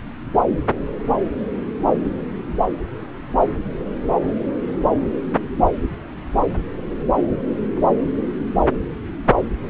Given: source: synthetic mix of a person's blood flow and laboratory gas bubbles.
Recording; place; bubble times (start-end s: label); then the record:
Doppler ultrasound of blood flow; subclavian vein
no bubbles
From the record:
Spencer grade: 0 (complete lack of bubble signals)